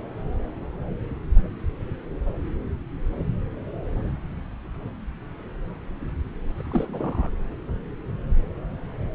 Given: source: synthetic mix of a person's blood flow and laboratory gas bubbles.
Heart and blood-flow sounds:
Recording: Doppler ultrasound of blood flow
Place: subclavian vein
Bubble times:
6.56-7.29 s: bubbles
From the record:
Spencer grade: 2 (many but less than half of the cardiac periods contain bubble signals, singularly or in groups)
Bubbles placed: anywhere in the cardiac cycle

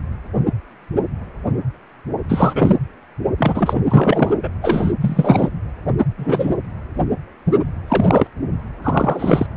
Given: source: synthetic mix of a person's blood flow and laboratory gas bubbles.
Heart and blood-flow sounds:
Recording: Doppler ultrasound of blood flow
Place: precordium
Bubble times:
2.28-2.76 s: bubbles
3.38-3.82 s: bubbles
3.88-4.37 s: bubbles
4.42-4.48 s: bubbles
4.62-4.93 s: bubbles
5.00-5.52 s: bubbles
6.17-6.56 s: bubbles
7.87-8.27 s: bubbles
8.82-9.47 s: bubbles
From the record:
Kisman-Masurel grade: 223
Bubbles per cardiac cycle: several, 3 to 8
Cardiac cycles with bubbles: 10 to 50%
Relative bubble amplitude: loud (0.450 to 0.775)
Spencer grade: 2 (many but less than half of the cardiac periods contain bubble signals, singularly or in groups)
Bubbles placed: anywhere in the cardiac cycle

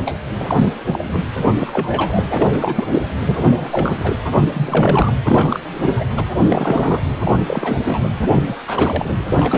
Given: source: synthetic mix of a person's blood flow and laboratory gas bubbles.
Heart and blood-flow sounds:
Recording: Doppler ultrasound of blood flow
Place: precordium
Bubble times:
0.05-0.15 s: bubbles
0.38-0.73 s: bubbles
0.86-1.26 s: bubbles
1.40-1.54 s: bubbles
1.58-2.50 s: bubbles
2.52-2.88 s: bubbles
2.91-3.02 s: bubbles
3.25-3.50 s: bubbles
3.55-4.16 s: bubbles
4.32-4.49 s: bubbles
4.53-5.13 s: bubbles
5.25-5.59 s: bubbles
5.82-6.04 s: bubbles
6.17-6.24 s: bubbles
6.48-7.09 s: bubbles
7.21-7.33 s: bubbles
7.47-7.78 s: bubbles
7.82-8.10 s: bubbles
8.17-8.29 s: bubbles
8.32-8.43 s: bubbles
8.47-8.57 s: bubbles
8.67-9.14 s: bubbles
9.26-9.58 s: bubbles
From the record:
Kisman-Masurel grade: 342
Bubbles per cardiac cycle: rolling drumbeat, 9 or more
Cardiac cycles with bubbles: 100%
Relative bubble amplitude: moderate (0.250 to 0.450)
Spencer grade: 3 (all of the cardiac periods contain showers or single bubble signals, but not dominating or overriding the cardiac motion signals)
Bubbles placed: anywhere in the cardiac cycle

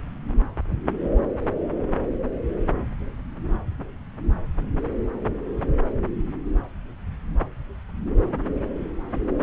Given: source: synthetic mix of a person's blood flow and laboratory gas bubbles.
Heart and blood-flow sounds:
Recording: Doppler ultrasound of blood flow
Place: subclavian vein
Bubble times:
no bubbles
From the record:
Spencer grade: 0 (complete lack of bubble signals)

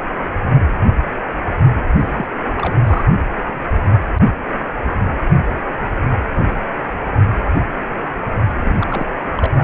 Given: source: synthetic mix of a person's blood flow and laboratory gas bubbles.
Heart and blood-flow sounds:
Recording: Doppler ultrasound of blood flow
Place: precordium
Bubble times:
2.00-2.25 s: bubbles
2.55-2.76 s: bubbles
2.85-3.04 s: bubbles
8.57-9.07 s: bubbles
9.37-9.51 s: bubbles
9.56-9.64 s: bubbles
From the record:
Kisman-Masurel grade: 222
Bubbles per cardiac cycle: several, 3 to 8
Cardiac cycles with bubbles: 10 to 50%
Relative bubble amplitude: moderate (0.250 to 0.450)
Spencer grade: 2 (many but less than half of the cardiac periods contain bubble signals, singularly or in groups)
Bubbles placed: only in the low amplitude regions of the cardiac cycle

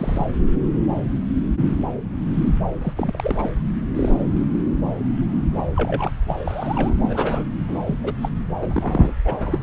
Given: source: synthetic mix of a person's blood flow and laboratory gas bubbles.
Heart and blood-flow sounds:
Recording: Doppler ultrasound of blood flow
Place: subclavian vein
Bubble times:
0.00-0.26 s: bubbles
2.81-2.93 s: bubbles
2.97-3.50 s: bubbles
3.56-3.67 s: bubbles
3.95-4.17 s: bubbles
5.53-5.62 s: bubbles
5.76-6.10 s: bubbles
6.28-6.36 s: bubbles
6.45-6.93 s: bubbles
7.00-7.44 s: bubbles
7.67-7.79 s: bubbles
7.85-7.95 s: bubbles
8.03-8.13 s: bubbles
8.21-8.31 s: bubbles
8.56-9.13 s: bubbles
9.24-9.63 s: bubbles
From the record:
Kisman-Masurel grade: 232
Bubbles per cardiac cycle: several, 3 to 8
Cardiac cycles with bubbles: 50 to 99%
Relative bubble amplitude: moderate (0.250 to 0.450)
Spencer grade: 3 (all of the cardiac periods contain showers or single bubble signals, but not dominating or overriding the cardiac motion signals)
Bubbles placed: anywhere in the cardiac cycle

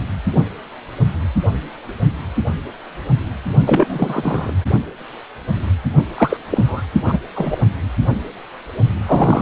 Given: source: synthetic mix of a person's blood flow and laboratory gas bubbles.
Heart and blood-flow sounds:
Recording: Doppler ultrasound of blood flow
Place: precordium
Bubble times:
3.66-4.52 s: bubbles
6.15-6.37 s: bubbles
6.50-6.82 s: bubbles
7.05-7.17 s: bubbles
7.35-7.57 s: bubbles
9.06-9.42 s: bubbles
From the record:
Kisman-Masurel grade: 223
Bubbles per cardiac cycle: several, 3 to 8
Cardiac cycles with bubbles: 10 to 50%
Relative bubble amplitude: loud (0.450 to 0.775)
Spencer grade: 2 (many but less than half of the cardiac periods contain bubble signals, singularly or in groups)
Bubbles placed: only in the low amplitude regions of the cardiac cycle

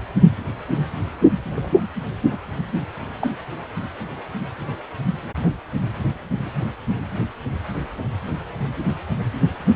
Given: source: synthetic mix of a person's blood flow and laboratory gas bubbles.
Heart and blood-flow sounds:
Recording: Doppler ultrasound of blood flow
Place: precordium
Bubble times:
1.54-1.69 s: bubbles
2.31-2.39 s: bubbles
3.20-3.27 s: bubbles
From the record:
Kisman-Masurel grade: 122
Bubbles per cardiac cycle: 1 to 2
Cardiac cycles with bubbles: 10 to 50%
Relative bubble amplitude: moderate (0.250 to 0.450)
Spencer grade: 2 (many but less than half of the cardiac periods contain bubble signals, singularly or in groups)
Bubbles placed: anywhere in the cardiac cycle

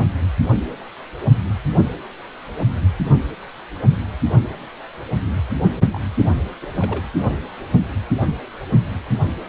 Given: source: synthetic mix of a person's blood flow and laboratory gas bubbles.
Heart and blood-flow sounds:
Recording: Doppler ultrasound of blood flow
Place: precordium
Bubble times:
5.91-6.00 s: bubbles
6.62-6.67 s: bubbles
6.79-7.04 s: bubbles
7.18-7.41 s: bubbles
From the record:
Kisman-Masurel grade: 211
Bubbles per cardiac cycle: several, 3 to 8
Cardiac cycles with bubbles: 1 to 10%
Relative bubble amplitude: barely perceptible (0.100 to 0.250)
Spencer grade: 1 (occasional bubble signal discernible with the cardiac motion signal, with majority of cardiac periods free of bubbles)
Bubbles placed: anywhere in the cardiac cycle

